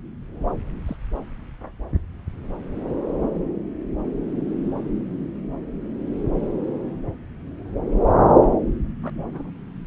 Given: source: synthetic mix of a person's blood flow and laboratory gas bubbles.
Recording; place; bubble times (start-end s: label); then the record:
Doppler ultrasound of blood flow; subclavian vein
0.86-0.96 s: bubbles
9.03-9.10 s: bubbles
9.32-9.51 s: bubbles
From the record:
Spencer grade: 2 (many but less than half of the cardiac periods contain bubble signals, singularly or in groups); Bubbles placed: anywhere in the cardiac cycle